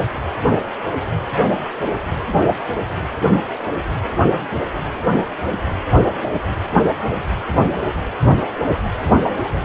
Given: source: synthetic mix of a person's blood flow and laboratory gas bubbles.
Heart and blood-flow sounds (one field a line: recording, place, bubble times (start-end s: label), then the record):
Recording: Doppler ultrasound of blood flow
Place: precordium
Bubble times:
no bubbles
From the record:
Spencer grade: 0 (complete lack of bubble signals)